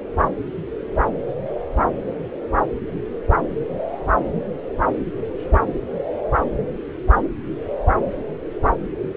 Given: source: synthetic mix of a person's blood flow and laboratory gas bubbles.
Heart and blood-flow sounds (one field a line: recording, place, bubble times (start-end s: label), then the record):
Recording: Doppler ultrasound of blood flow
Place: subclavian vein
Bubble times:
no bubbles
From the record:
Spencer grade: 0 (complete lack of bubble signals)